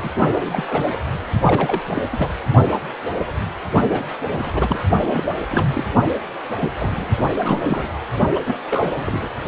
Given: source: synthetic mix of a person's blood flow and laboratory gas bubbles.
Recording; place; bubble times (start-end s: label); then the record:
Doppler ultrasound of blood flow; precordium
0.03-0.11 s: bubbles
0.33-0.64 s: bubbles
0.67-0.86 s: bubbles
0.92-0.98 s: bubbles
1.44-1.82 s: bubbles
1.89-2.04 s: bubbles
2.12-2.28 s: bubbles
3.89-4.03 s: bubbles
4.26-4.51 s: bubbles
4.54-4.79 s: bubbles
5.04-5.23 s: bubbles
5.50-5.85 s: bubbles
6.59-6.69 s: bubbles
6.78-7.12 s: bubbles
7.17-7.31 s: bubbles
7.40-7.87 s: bubbles
8.35-8.41 s: bubbles
8.46-8.57 s: bubbles
8.71-9.28 s: bubbles
From the record:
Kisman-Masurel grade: 332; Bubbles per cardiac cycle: rolling drumbeat, 9 or more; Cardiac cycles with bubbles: 50 to 99%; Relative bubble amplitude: moderate (0.250 to 0.450); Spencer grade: 3 (all of the cardiac periods contain showers or single bubble signals, but not dominating or overriding the cardiac motion signals); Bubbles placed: only in the low amplitude regions of the cardiac cycle